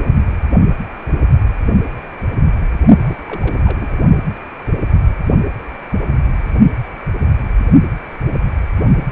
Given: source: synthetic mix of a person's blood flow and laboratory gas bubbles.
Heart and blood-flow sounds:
Doppler ultrasound of blood flow; precordium
2.98-3.97 s: bubbles
From the record:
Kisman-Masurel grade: 221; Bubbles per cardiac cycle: several, 3 to 8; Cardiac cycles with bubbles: 10 to 50%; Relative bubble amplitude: barely perceptible (0.100 to 0.250); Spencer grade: 2 (many but less than half of the cardiac periods contain bubble signals, singularly or in groups); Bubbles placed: only in the low amplitude regions of the cardiac cycle

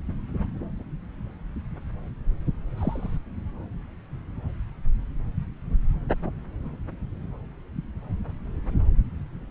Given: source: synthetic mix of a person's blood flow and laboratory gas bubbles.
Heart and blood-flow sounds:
Doppler ultrasound of blood flow; subclavian vein
2.77-3.18 s: bubbles
From the record:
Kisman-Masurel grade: 112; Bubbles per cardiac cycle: 1 to 2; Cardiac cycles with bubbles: 1 to 10%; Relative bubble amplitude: moderate (0.250 to 0.450); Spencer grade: 1 (occasional bubble signal discernible with the cardiac motion signal, with majority of cardiac periods free of bubbles); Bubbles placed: anywhere in the cardiac cycle

